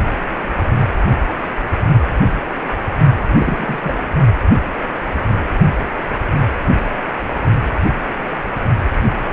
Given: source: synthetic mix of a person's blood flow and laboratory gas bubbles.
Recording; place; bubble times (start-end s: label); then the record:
Doppler ultrasound of blood flow; precordium
3.35-4.12 s: bubbles
From the record:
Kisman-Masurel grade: 212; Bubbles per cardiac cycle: several, 3 to 8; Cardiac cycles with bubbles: 1 to 10%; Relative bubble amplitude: moderate (0.250 to 0.450); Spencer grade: 1 (occasional bubble signal discernible with the cardiac motion signal, with majority of cardiac periods free of bubbles); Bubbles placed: only in the low amplitude regions of the cardiac cycle